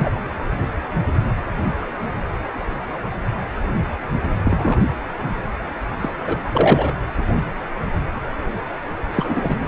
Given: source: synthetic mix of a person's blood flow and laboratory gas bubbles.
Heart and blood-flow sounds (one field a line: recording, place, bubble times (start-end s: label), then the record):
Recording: Doppler ultrasound of blood flow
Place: precordium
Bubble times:
0.00-0.10 s: bubbles
4.43-4.79 s: bubbles
6.00-6.14 s: bubbles
6.27-6.37 s: bubbles
6.52-6.93 s: bubbles
9.13-9.59 s: bubbles
9.66-9.68 s: bubbles
From the record:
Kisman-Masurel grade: 223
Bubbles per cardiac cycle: several, 3 to 8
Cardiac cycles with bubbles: 10 to 50%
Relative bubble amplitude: loud (0.450 to 0.775)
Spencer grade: 2 (many but less than half of the cardiac periods contain bubble signals, singularly or in groups)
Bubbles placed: anywhere in the cardiac cycle